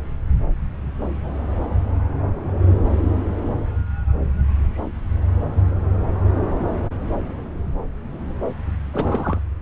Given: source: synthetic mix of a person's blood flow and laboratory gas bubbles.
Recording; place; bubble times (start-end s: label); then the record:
Doppler ultrasound of blood flow; subclavian vein
8.92-9.40 s: bubbles
From the record:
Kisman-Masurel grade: 212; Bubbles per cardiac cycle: several, 3 to 8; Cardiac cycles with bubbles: 1 to 10%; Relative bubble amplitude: moderate (0.250 to 0.450); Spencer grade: 1 (occasional bubble signal discernible with the cardiac motion signal, with majority of cardiac periods free of bubbles); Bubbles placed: anywhere in the cardiac cycle